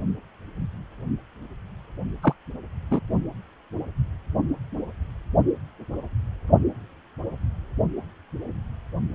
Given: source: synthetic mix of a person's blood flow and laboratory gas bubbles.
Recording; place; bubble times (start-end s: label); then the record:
Doppler ultrasound of blood flow; precordium
2.23-2.33 s: bubbles
2.91-3.00 s: bubbles
From the record:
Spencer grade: 1 (occasional bubble signal discernible with the cardiac motion signal, with majority of cardiac periods free of bubbles); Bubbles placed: only in the low amplitude regions of the cardiac cycle